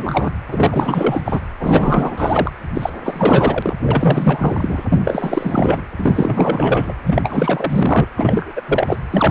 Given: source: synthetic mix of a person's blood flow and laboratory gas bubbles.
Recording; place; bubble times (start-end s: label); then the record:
Doppler ultrasound of blood flow; precordium
0.00-0.33 s: bubbles
0.47-1.21 s: bubbles
1.24-1.41 s: bubbles
1.59-2.51 s: bubbles
2.74-2.90 s: bubbles
3.04-3.76 s: bubbles
3.82-4.85 s: bubbles
4.89-5.01 s: bubbles
5.04-5.82 s: bubbles
5.97-6.94 s: bubbles
7.06-8.06 s: bubbles
8.17-8.52 s: bubbles
8.55-8.62 s: bubbles
8.66-9.00 s: bubbles
9.10-9.31 s: bubbles
From the record:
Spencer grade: 4 (maximum detectable bubble signal sounding continuously throughout systole and diastole of every cardiac period, and overriding the amplitude of the normal cardiac signals); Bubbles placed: anywhere in the cardiac cycle